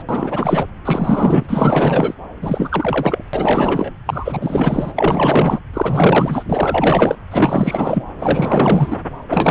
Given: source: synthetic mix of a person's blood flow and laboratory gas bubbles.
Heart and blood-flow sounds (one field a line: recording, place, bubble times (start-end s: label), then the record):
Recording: Doppler ultrasound of blood flow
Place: subclavian vein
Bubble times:
0.00-0.02 s: bubbles
0.09-0.68 s: bubbles
0.84-2.14 s: bubbles
2.42-3.23 s: bubbles
3.33-3.93 s: bubbles
4.06-4.92 s: bubbles
4.95-5.59 s: bubbles
5.74-6.45 s: bubbles
6.50-7.16 s: bubbles
7.31-8.04 s: bubbles
8.19-8.96 s: bubbles
9.29-9.51 s: bubbles
From the record:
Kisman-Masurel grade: 444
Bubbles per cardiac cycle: continuous sound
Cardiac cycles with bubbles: 100%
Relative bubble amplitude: maximal (0.775 to 0.999)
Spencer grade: 4 (maximum detectable bubble signal sounding continuously throughout systole and diastole of every cardiac period, and overriding the amplitude of the normal cardiac signals)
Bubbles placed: anywhere in the cardiac cycle